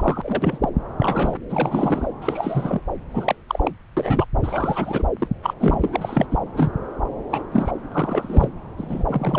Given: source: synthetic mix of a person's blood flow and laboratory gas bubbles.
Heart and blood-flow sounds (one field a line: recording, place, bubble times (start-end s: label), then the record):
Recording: Doppler ultrasound of blood flow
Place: subclavian vein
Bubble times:
0.00-0.58 s: bubbles
0.61-0.69 s: bubbles
0.97-1.36 s: bubbles
1.50-2.08 s: bubbles
2.22-2.81 s: bubbles
3.11-3.35 s: bubbles
3.49-3.71 s: bubbles
3.96-4.25 s: bubbles
4.42-5.07 s: bubbles
5.19-5.28 s: bubbles
5.43-5.54 s: bubbles
5.59-6.26 s: bubbles
6.30-6.37 s: bubbles
6.55-6.71 s: bubbles
7.29-7.42 s: bubbles
7.52-7.71 s: bubbles
7.92-8.50 s: bubbles
8.77-9.04 s: bubbles
9.07-9.39 s: bubbles
From the record:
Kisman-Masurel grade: 242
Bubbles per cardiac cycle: several, 3 to 8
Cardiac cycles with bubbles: 100%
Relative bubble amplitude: moderate (0.250 to 0.450)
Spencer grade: 3 (all of the cardiac periods contain showers or single bubble signals, but not dominating or overriding the cardiac motion signals)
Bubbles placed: anywhere in the cardiac cycle